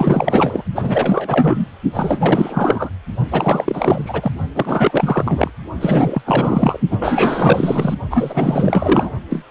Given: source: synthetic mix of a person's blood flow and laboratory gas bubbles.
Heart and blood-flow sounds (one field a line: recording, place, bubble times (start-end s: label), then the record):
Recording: Doppler ultrasound of blood flow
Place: precordium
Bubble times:
0.00-0.64 s: bubbles
0.75-1.67 s: bubbles
1.94-2.90 s: bubbles
3.31-4.31 s: bubbles
4.54-5.50 s: bubbles
5.80-6.22 s: bubbles
6.26-6.80 s: bubbles
6.91-7.95 s: bubbles
8.10-9.11 s: bubbles
9.29-9.45 s: bubbles
From the record:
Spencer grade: 4 (maximum detectable bubble signal sounding continuously throughout systole and diastole of every cardiac period, and overriding the amplitude of the normal cardiac signals)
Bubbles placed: only in the low amplitude regions of the cardiac cycle